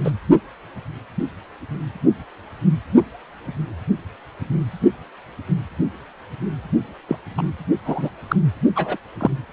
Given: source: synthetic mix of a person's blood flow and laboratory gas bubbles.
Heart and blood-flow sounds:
Doppler ultrasound of blood flow; precordium
0.04-0.11 s: bubbles
7.08-7.16 s: bubbles
7.37-7.43 s: bubbles
7.85-8.10 s: bubbles
8.28-8.36 s: bubbles
8.76-8.96 s: bubbles
9.20-9.30 s: bubbles
From the record:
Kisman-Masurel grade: 123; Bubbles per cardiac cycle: 1 to 2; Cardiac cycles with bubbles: 10 to 50%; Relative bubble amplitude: loud (0.450 to 0.775); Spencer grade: 2 (many but less than half of the cardiac periods contain bubble signals, singularly or in groups); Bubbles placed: only in the low amplitude regions of the cardiac cycle

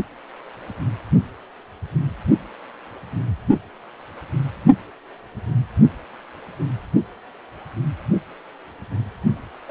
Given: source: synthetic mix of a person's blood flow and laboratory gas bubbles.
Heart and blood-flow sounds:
Doppler ultrasound of blood flow; precordium
9.68-9.71 s: bubbles
From the record:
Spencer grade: 2 (many but less than half of the cardiac periods contain bubble signals, singularly or in groups); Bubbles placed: only in the low amplitude regions of the cardiac cycle

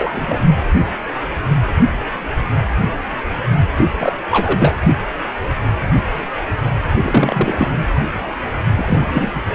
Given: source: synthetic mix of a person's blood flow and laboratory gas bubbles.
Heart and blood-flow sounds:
Doppler ultrasound of blood flow; precordium
0.00-0.09 s: bubbles
0.11-0.64 s: bubbles
3.76-3.86 s: bubbles
3.98-4.12 s: bubbles
4.31-4.75 s: bubbles
6.97-7.71 s: bubbles
8.76-9.42 s: bubbles
From the record:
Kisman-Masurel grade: 233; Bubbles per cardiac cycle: several, 3 to 8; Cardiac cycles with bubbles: 50 to 99%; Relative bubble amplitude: loud (0.450 to 0.775); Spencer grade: 3 (all of the cardiac periods contain showers or single bubble signals, but not dominating or overriding the cardiac motion signals); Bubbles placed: only in the low amplitude regions of the cardiac cycle

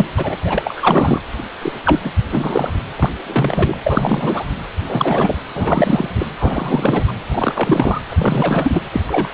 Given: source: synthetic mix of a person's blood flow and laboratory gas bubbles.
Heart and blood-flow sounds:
Doppler ultrasound of blood flow; precordium
0.00-0.06 s: bubbles
0.16-0.37 s: bubbles
0.45-1.22 s: bubbles
1.61-1.72 s: bubbles
1.84-2.00 s: bubbles
2.03-2.12 s: bubbles
2.32-2.71 s: bubbles
2.97-3.12 s: bubbles
3.27-3.77 s: bubbles
3.83-4.46 s: bubbles
4.79-5.39 s: bubbles
5.48-6.10 s: bubbles
6.14-6.25 s: bubbles
6.38-7.13 s: bubbles
7.31-8.00 s: bubbles
8.09-8.82 s: bubbles
8.92-9.00 s: bubbles
9.06-9.34 s: bubbles
From the record:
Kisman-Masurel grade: 343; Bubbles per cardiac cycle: rolling drumbeat, 9 or more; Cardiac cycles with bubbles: 100%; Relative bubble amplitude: loud (0.450 to 0.775); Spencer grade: 3 (all of the cardiac periods contain showers or single bubble signals, but not dominating or overriding the cardiac motion signals); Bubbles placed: anywhere in the cardiac cycle

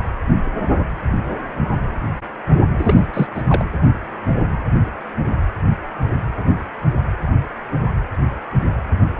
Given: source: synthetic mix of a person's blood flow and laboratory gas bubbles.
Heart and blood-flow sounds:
Doppler ultrasound of blood flow; precordium
2.78-3.07 s: bubbles
3.13-3.27 s: bubbles
3.34-3.42 s: bubbles
3.48-3.65 s: bubbles
From the record:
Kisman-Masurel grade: 212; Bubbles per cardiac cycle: several, 3 to 8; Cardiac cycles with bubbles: 1 to 10%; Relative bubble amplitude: moderate (0.250 to 0.450); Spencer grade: 1 (occasional bubble signal discernible with the cardiac motion signal, with majority of cardiac periods free of bubbles); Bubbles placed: anywhere in the cardiac cycle

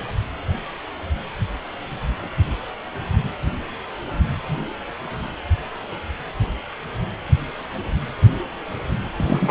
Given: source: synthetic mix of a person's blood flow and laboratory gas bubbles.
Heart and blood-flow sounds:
Doppler ultrasound of blood flow; precordium
9.17-9.51 s: bubbles
From the record:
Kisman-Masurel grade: 212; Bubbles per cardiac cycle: several, 3 to 8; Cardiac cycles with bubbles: 1 to 10%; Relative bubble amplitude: moderate (0.250 to 0.450); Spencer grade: 1 (occasional bubble signal discernible with the cardiac motion signal, with majority of cardiac periods free of bubbles); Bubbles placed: anywhere in the cardiac cycle

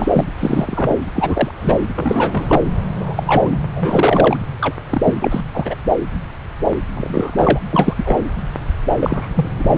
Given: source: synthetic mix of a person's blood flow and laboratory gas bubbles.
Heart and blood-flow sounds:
Doppler ultrasound of blood flow; subclavian vein
0.00-0.07 s: bubbles
0.12-0.24 s: bubbles
0.38-0.94 s: bubbles
1.15-1.51 s: bubbles
1.56-1.81 s: bubbles
1.95-2.60 s: bubbles
2.99-3.23 s: bubbles
3.26-3.60 s: bubbles
3.74-4.37 s: bubbles
4.61-4.74 s: bubbles
4.90-5.13 s: bubbles
5.23-5.41 s: bubbles
5.53-5.75 s: bubbles
6.94-7.59 s: bubbles
7.73-8.18 s: bubbles
8.99-9.28 s: bubbles
9.34-9.48 s: bubbles
9.57-9.78 s: bubbles
From the record:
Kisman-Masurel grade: 233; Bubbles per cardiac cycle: several, 3 to 8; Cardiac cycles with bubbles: 50 to 99%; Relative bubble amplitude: loud (0.450 to 0.775); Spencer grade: 3 (all of the cardiac periods contain showers or single bubble signals, but not dominating or overriding the cardiac motion signals); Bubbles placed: anywhere in the cardiac cycle

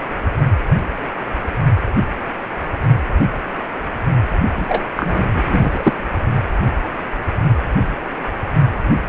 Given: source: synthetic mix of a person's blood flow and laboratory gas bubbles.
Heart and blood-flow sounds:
Doppler ultrasound of blood flow; precordium
4.57-4.85 s: bubbles
4.96-5.93 s: bubbles
From the record:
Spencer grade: 1 (occasional bubble signal discernible with the cardiac motion signal, with majority of cardiac periods free of bubbles); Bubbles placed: only in the low amplitude regions of the cardiac cycle

